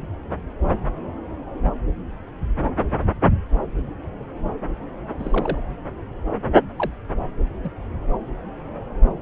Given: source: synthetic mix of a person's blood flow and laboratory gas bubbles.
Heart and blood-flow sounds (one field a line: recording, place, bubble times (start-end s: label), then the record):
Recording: Doppler ultrasound of blood flow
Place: subclavian vein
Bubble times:
5.19-5.58 s: bubbles
6.77-6.91 s: bubbles
7.64-7.70 s: bubbles
From the record:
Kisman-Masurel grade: 121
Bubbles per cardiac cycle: 1 to 2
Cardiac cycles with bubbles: 10 to 50%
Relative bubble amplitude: barely perceptible (0.100 to 0.250)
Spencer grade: 2 (many but less than half of the cardiac periods contain bubble signals, singularly or in groups)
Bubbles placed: anywhere in the cardiac cycle